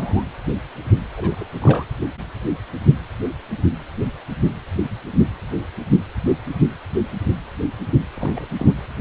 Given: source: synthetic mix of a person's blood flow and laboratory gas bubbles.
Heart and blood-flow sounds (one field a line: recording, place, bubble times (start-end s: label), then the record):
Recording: Doppler ultrasound of blood flow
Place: precordium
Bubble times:
0.00-0.24 s: bubbles
1.17-1.45 s: bubbles
1.61-1.85 s: bubbles
8.16-8.31 s: bubbles
8.35-8.73 s: bubbles
From the record:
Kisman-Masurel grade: 221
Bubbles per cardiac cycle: several, 3 to 8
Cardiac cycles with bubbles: 10 to 50%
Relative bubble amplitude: barely perceptible (0.100 to 0.250)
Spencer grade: 2 (many but less than half of the cardiac periods contain bubble signals, singularly or in groups)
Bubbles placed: anywhere in the cardiac cycle